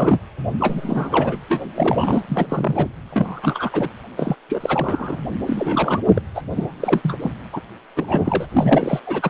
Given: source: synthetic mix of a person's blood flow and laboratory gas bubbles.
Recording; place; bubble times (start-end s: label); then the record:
Doppler ultrasound of blood flow; precordium
0.00-0.19 s: bubbles
0.60-1.37 s: bubbles
1.49-1.67 s: bubbles
1.75-2.23 s: bubbles
2.29-2.88 s: bubbles
3.10-3.89 s: bubbles
4.16-4.35 s: bubbles
4.49-5.20 s: bubbles
5.47-6.00 s: bubbles
6.05-6.22 s: bubbles
6.34-6.42 s: bubbles
6.50-7.17 s: bubbles
7.22-7.30 s: bubbles
7.52-7.61 s: bubbles
7.96-9.01 s: bubbles
9.06-9.30 s: bubbles
From the record:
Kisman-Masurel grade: 332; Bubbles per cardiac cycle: rolling drumbeat, 9 or more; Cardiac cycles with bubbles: 50 to 99%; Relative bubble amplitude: moderate (0.250 to 0.450); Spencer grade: 3 (all of the cardiac periods contain showers or single bubble signals, but not dominating or overriding the cardiac motion signals); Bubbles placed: anywhere in the cardiac cycle